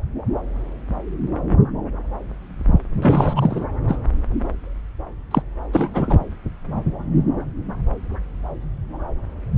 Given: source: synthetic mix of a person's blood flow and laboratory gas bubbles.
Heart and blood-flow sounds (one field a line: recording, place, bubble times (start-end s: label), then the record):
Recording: Doppler ultrasound of blood flow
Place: subclavian vein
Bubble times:
3.02-3.67 s: bubbles
3.88-3.98 s: bubbles
5.31-5.42 s: bubbles
5.73-5.90 s: bubbles
5.94-6.24 s: bubbles
From the record:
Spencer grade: 2 (many but less than half of the cardiac periods contain bubble signals, singularly or in groups)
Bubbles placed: anywhere in the cardiac cycle